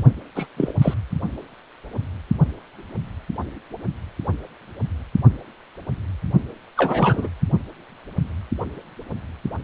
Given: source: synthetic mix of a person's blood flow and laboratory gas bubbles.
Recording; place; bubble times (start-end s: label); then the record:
Doppler ultrasound of blood flow; precordium
0.00-0.04 s: bubbles
0.35-0.46 s: bubbles
0.56-0.72 s: bubbles
0.81-0.94 s: bubbles
6.77-7.28 s: bubbles
From the record:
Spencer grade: 3 (all of the cardiac periods contain showers or single bubble signals, but not dominating or overriding the cardiac motion signals); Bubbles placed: only in the low amplitude regions of the cardiac cycle